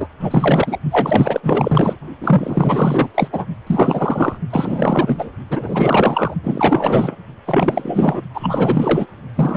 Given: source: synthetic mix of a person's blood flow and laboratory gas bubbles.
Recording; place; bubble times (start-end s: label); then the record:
Doppler ultrasound of blood flow; precordium
0.00-0.07 s: bubbles
0.19-0.78 s: bubbles
0.91-1.96 s: bubbles
2.21-3.09 s: bubbles
3.15-3.28 s: bubbles
3.32-3.45 s: bubbles
3.67-4.38 s: bubbles
4.50-5.29 s: bubbles
5.50-6.34 s: bubbles
6.43-7.16 s: bubbles
7.46-8.21 s: bubbles
8.34-9.06 s: bubbles
9.36-9.57 s: bubbles
From the record:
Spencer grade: 4 (maximum detectable bubble signal sounding continuously throughout systole and diastole of every cardiac period, and overriding the amplitude of the normal cardiac signals); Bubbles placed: only in the low amplitude regions of the cardiac cycle